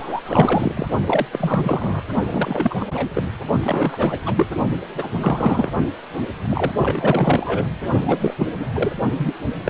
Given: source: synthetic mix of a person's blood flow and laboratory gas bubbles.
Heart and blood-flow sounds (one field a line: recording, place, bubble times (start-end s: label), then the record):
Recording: Doppler ultrasound of blood flow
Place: precordium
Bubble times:
0.00-0.21 s: bubbles
0.25-0.87 s: bubbles
1.06-1.25 s: bubbles
1.31-2.03 s: bubbles
2.30-2.75 s: bubbles
2.79-2.85 s: bubbles
2.94-3.09 s: bubbles
3.14-3.22 s: bubbles
3.60-4.18 s: bubbles
4.25-4.46 s: bubbles
4.93-5.72 s: bubbles
6.47-6.72 s: bubbles
6.76-7.68 s: bubbles
8.06-8.34 s: bubbles
8.38-8.48 s: bubbles
8.59-8.68 s: bubbles
8.74-8.92 s: bubbles
9.17-9.33 s: bubbles
9.65-9.70 s: bubbles
From the record:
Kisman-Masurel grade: 343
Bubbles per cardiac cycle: rolling drumbeat, 9 or more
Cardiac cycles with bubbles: 100%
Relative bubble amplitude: loud (0.450 to 0.775)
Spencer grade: 3 (all of the cardiac periods contain showers or single bubble signals, but not dominating or overriding the cardiac motion signals)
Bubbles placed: only in the low amplitude regions of the cardiac cycle